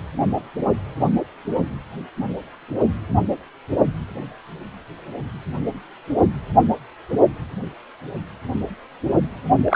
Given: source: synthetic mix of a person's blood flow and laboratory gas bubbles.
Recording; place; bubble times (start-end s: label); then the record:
Doppler ultrasound of blood flow; precordium
9.64-9.76 s: bubbles
From the record:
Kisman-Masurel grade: 223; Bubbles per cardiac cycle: several, 3 to 8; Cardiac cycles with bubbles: 10 to 50%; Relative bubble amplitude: loud (0.450 to 0.775); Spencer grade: 2 (many but less than half of the cardiac periods contain bubble signals, singularly or in groups); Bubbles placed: only in the low amplitude regions of the cardiac cycle